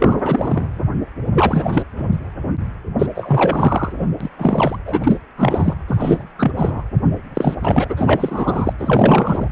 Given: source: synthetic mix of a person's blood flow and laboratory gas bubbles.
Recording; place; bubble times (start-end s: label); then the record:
Doppler ultrasound of blood flow; precordium
0.00-0.69 s: bubbles
1.34-1.82 s: bubbles
1.97-2.08 s: bubbles
2.12-2.20 s: bubbles
2.99-3.07 s: bubbles
3.15-3.94 s: bubbles
3.96-4.06 s: bubbles
4.21-4.29 s: bubbles
4.39-4.79 s: bubbles
4.86-5.20 s: bubbles
5.37-5.74 s: bubbles
5.88-6.24 s: bubbles
6.39-6.83 s: bubbles
7.35-7.55 s: bubbles
7.61-7.84 s: bubbles
7.89-8.73 s: bubbles
8.79-9.48 s: bubbles
From the record:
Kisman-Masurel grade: 343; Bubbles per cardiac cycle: rolling drumbeat, 9 or more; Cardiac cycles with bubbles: 100%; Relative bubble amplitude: loud (0.450 to 0.775); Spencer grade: 3 (all of the cardiac periods contain showers or single bubble signals, but not dominating or overriding the cardiac motion signals); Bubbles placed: anywhere in the cardiac cycle